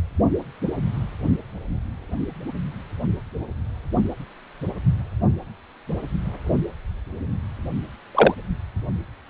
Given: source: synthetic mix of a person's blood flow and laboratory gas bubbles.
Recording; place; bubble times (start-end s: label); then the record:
Doppler ultrasound of blood flow; precordium
8.14-8.35 s: bubbles
From the record:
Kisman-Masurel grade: 113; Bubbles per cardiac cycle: 1 to 2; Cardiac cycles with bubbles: 1 to 10%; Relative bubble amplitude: loud (0.450 to 0.775); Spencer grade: 1 (occasional bubble signal discernible with the cardiac motion signal, with majority of cardiac periods free of bubbles); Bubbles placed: only in the low amplitude regions of the cardiac cycle